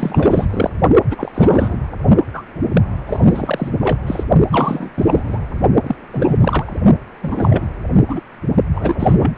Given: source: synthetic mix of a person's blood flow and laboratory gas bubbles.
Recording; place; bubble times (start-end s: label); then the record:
Doppler ultrasound of blood flow; precordium
0.00-0.45 s: bubbles
0.50-0.70 s: bubbles
1.10-1.31 s: bubbles
1.34-1.77 s: bubbles
2.33-2.42 s: bubbles
2.73-2.81 s: bubbles
3.06-3.70 s: bubbles
3.80-3.97 s: bubbles
4.07-4.24 s: bubbles
4.51-4.90 s: bubbles
4.96-5.38 s: bubbles
5.83-5.96 s: bubbles
6.13-6.37 s: bubbles
6.40-6.73 s: bubbles
7.23-7.66 s: bubbles
8.07-8.20 s: bubbles
8.74-9.31 s: bubbles
9.35-9.38 s: bubbles
From the record:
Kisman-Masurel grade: 343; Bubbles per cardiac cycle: rolling drumbeat, 9 or more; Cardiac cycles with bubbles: 100%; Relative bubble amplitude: loud (0.450 to 0.775); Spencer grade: 3 (all of the cardiac periods contain showers or single bubble signals, but not dominating or overriding the cardiac motion signals); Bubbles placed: only in the low amplitude regions of the cardiac cycle